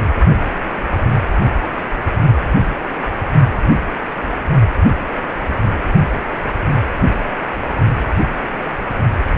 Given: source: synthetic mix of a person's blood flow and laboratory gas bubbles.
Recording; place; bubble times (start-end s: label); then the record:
Doppler ultrasound of blood flow; precordium
no bubbles
From the record:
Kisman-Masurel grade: 000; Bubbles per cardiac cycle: 0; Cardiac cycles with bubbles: 0%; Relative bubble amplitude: no bubbles discernible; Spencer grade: 0 (complete lack of bubble signals)